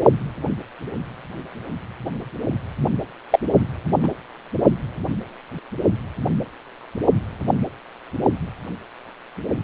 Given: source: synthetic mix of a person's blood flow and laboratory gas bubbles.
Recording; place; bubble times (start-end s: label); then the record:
Doppler ultrasound of blood flow; precordium
3.30-3.39 s: bubbles
4.03-4.08 s: bubbles
From the record:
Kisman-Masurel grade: 113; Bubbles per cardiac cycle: 1 to 2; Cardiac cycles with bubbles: 1 to 10%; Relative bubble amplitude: loud (0.450 to 0.775); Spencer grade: 1 (occasional bubble signal discernible with the cardiac motion signal, with majority of cardiac periods free of bubbles); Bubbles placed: anywhere in the cardiac cycle